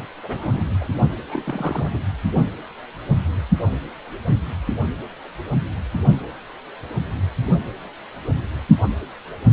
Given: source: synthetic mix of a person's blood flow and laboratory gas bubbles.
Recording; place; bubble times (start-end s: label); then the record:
Doppler ultrasound of blood flow; precordium
0.00-0.05 s: bubbles
0.22-0.68 s: bubbles
0.80-0.89 s: bubbles
1.28-1.91 s: bubbles
1.95-1.98 s: bubbles
From the record:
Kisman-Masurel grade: 221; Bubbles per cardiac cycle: several, 3 to 8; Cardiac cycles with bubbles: 10 to 50%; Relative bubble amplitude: barely perceptible (0.100 to 0.250); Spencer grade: 2 (many but less than half of the cardiac periods contain bubble signals, singularly or in groups); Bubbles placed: only in the low amplitude regions of the cardiac cycle